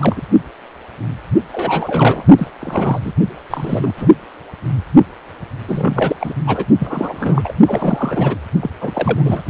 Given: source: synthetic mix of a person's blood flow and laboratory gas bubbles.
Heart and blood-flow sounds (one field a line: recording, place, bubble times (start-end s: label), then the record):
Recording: Doppler ultrasound of blood flow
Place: precordium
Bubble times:
0.00-0.22 s: bubbles
1.52-2.25 s: bubbles
2.38-2.47 s: bubbles
2.61-3.13 s: bubbles
3.50-3.92 s: bubbles
3.96-4.07 s: bubbles
5.67-6.15 s: bubbles
6.21-6.34 s: bubbles
6.46-6.65 s: bubbles
6.79-7.53 s: bubbles
7.67-8.37 s: bubbles
8.61-8.71 s: bubbles
8.81-9.42 s: bubbles
From the record:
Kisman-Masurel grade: 332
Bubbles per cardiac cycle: rolling drumbeat, 9 or more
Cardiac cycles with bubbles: 50 to 99%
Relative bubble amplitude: moderate (0.250 to 0.450)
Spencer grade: 3 (all of the cardiac periods contain showers or single bubble signals, but not dominating or overriding the cardiac motion signals)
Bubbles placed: only in the low amplitude regions of the cardiac cycle